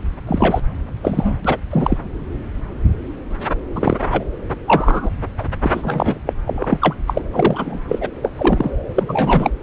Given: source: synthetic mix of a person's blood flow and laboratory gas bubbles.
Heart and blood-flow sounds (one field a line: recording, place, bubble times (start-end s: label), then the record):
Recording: Doppler ultrasound of blood flow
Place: subclavian vein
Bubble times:
0.27-0.60 s: bubbles
1.02-1.38 s: bubbles
1.44-1.58 s: bubbles
1.71-1.98 s: bubbles
3.75-3.96 s: bubbles
4.01-4.06 s: bubbles
4.11-4.24 s: bubbles
4.67-5.10 s: bubbles
5.38-5.44 s: bubbles
5.63-5.71 s: bubbles
5.74-6.18 s: bubbles
6.25-6.33 s: bubbles
6.46-6.96 s: bubbles
7.07-7.21 s: bubbles
7.32-7.79 s: bubbles
7.88-8.10 s: bubbles
8.21-8.30 s: bubbles
8.35-8.71 s: bubbles
8.89-9.50 s: bubbles
From the record:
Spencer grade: 3 (all of the cardiac periods contain showers or single bubble signals, but not dominating or overriding the cardiac motion signals)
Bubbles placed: anywhere in the cardiac cycle